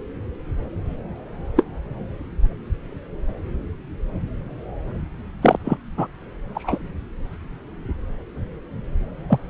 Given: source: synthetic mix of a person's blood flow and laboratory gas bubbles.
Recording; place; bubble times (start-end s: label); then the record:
Doppler ultrasound of blood flow; subclavian vein
1.56-1.63 s: bubbles
5.42-5.57 s: bubbles
5.64-5.78 s: bubbles
5.97-6.07 s: bubbles
6.54-6.78 s: bubbles
9.28-9.39 s: bubbles
From the record:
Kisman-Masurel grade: 123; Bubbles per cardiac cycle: 1 to 2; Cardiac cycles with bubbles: 10 to 50%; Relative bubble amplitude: loud (0.450 to 0.775); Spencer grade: 2 (many but less than half of the cardiac periods contain bubble signals, singularly or in groups); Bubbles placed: anywhere in the cardiac cycle